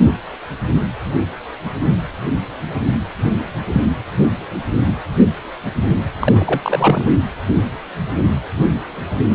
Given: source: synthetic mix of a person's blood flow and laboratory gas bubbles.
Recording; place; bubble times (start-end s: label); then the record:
Doppler ultrasound of blood flow; precordium
6.21-7.04 s: bubbles
From the record:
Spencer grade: 2 (many but less than half of the cardiac periods contain bubble signals, singularly or in groups); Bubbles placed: anywhere in the cardiac cycle